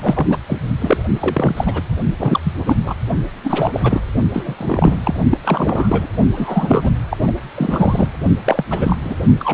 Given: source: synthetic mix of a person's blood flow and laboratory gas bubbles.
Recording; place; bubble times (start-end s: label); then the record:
Doppler ultrasound of blood flow; precordium
0.01-0.37 s: bubbles
0.48-0.58 s: bubbles
0.80-0.97 s: bubbles
1.14-1.81 s: bubbles
2.19-2.40 s: bubbles
2.44-2.54 s: bubbles
2.67-2.77 s: bubbles
2.84-2.96 s: bubbles
3.44-3.80 s: bubbles
3.83-4.01 s: bubbles
4.33-4.55 s: bubbles
4.58-4.99 s: bubbles
5.04-5.14 s: bubbles
5.31-5.38 s: bubbles
5.44-6.07 s: bubbles
6.34-6.91 s: bubbles
7.10-7.17 s: bubbles
7.27-7.31 s: bubbles
7.54-8.09 s: bubbles
8.46-8.64 s: bubbles
8.70-8.96 s: bubbles
9.03-9.15 s: bubbles
9.39-9.54 s: bubbles
From the record:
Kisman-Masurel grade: 342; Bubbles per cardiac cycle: rolling drumbeat, 9 or more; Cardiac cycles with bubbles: 100%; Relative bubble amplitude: moderate (0.250 to 0.450); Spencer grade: 3 (all of the cardiac periods contain showers or single bubble signals, but not dominating or overriding the cardiac motion signals); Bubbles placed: only in the low amplitude regions of the cardiac cycle